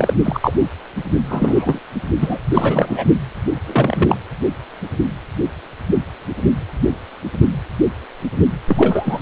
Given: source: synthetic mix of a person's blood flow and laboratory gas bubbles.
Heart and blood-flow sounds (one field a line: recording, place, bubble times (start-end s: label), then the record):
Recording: Doppler ultrasound of blood flow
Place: precordium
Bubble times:
0.00-0.14 s: bubbles
0.24-0.52 s: bubbles
0.58-0.67 s: bubbles
1.28-1.80 s: bubbles
2.21-2.38 s: bubbles
2.53-3.04 s: bubbles
3.66-4.17 s: bubbles
8.68-9.22 s: bubbles
From the record:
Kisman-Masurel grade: 233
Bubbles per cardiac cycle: several, 3 to 8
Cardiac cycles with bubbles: 50 to 99%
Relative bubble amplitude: loud (0.450 to 0.775)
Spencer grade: 3 (all of the cardiac periods contain showers or single bubble signals, but not dominating or overriding the cardiac motion signals)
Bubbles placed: only in the low amplitude regions of the cardiac cycle